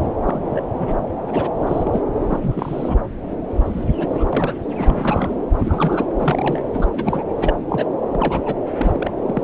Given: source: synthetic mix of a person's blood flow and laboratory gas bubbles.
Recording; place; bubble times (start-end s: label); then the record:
Doppler ultrasound of blood flow; subclavian vein
0.24-0.62 s: bubbles
0.79-0.97 s: bubbles
1.25-1.50 s: bubbles
1.60-2.00 s: bubbles
2.29-2.97 s: bubbles
3.65-3.84 s: bubbles
3.99-4.27 s: bubbles
4.33-4.54 s: bubbles
4.76-5.35 s: bubbles
5.59-6.05 s: bubbles
6.19-6.62 s: bubbles
6.74-6.88 s: bubbles
6.92-7.23 s: bubbles
7.38-7.55 s: bubbles
7.69-7.89 s: bubbles
8.11-8.41 s: bubbles
8.45-8.55 s: bubbles
8.77-9.11 s: bubbles
9.26-9.43 s: bubbles
From the record:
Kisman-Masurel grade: 242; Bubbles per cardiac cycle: several, 3 to 8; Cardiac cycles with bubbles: 100%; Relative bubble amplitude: moderate (0.250 to 0.450); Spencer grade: 3 (all of the cardiac periods contain showers or single bubble signals, but not dominating or overriding the cardiac motion signals); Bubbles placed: anywhere in the cardiac cycle